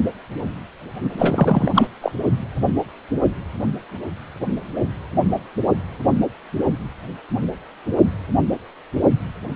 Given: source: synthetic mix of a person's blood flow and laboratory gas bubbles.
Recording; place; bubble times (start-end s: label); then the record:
Doppler ultrasound of blood flow; precordium
1.19-1.88 s: bubbles
2.01-2.12 s: bubbles
From the record:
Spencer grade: 1 (occasional bubble signal discernible with the cardiac motion signal, with majority of cardiac periods free of bubbles); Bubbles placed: only in the low amplitude regions of the cardiac cycle